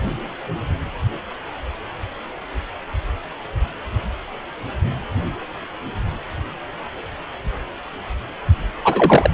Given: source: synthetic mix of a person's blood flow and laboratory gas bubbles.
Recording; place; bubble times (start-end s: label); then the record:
Doppler ultrasound of blood flow; precordium
8.84-9.30 s: bubbles
From the record:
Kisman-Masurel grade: 213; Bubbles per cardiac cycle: several, 3 to 8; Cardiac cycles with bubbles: 1 to 10%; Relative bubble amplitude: loud (0.450 to 0.775); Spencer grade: 1 (occasional bubble signal discernible with the cardiac motion signal, with majority of cardiac periods free of bubbles); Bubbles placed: anywhere in the cardiac cycle